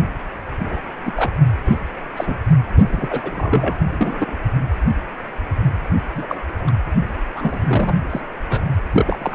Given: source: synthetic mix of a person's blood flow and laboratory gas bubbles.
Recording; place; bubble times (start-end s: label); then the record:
Doppler ultrasound of blood flow; precordium
0.64-0.82 s: bubbles
1.05-1.13 s: bubbles
1.16-1.31 s: bubbles
1.65-1.79 s: bubbles
2.17-2.38 s: bubbles
2.89-3.76 s: bubbles
3.93-4.37 s: bubbles
6.15-6.41 s: bubbles
6.67-6.71 s: bubbles
7.34-7.60 s: bubbles
7.67-7.97 s: bubbles
8.09-8.21 s: bubbles
8.49-8.61 s: bubbles
8.92-9.35 s: bubbles
From the record:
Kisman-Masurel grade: 233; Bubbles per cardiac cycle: several, 3 to 8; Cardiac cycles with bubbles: 50 to 99%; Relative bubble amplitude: loud (0.450 to 0.775); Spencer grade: 3 (all of the cardiac periods contain showers or single bubble signals, but not dominating or overriding the cardiac motion signals); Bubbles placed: anywhere in the cardiac cycle